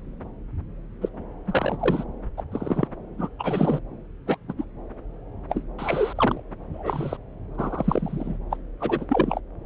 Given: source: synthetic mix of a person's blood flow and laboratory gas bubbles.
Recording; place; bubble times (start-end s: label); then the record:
Doppler ultrasound of blood flow; subclavian vein
1.01-1.09 s: bubbles
1.46-1.77 s: bubbles
1.80-2.04 s: bubbles
2.38-2.41 s: bubbles
2.52-2.88 s: bubbles
3.18-3.29 s: bubbles
3.39-3.81 s: bubbles
4.27-4.37 s: bubbles
4.48-4.53 s: bubbles
4.58-4.65 s: bubbles
5.50-5.64 s: bubbles
5.79-6.13 s: bubbles
6.16-6.42 s: bubbles
6.74-7.17 s: bubbles
7.58-8.38 s: bubbles
8.50-8.57 s: bubbles
8.80-9.06 s: bubbles
9.09-9.40 s: bubbles
From the record:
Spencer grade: 3 (all of the cardiac periods contain showers or single bubble signals, but not dominating or overriding the cardiac motion signals); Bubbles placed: anywhere in the cardiac cycle